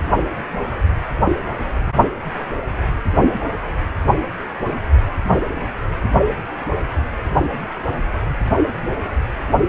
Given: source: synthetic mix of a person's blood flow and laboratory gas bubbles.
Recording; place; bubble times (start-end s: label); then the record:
Doppler ultrasound of blood flow; precordium
no bubbles
From the record:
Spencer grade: 0 (complete lack of bubble signals)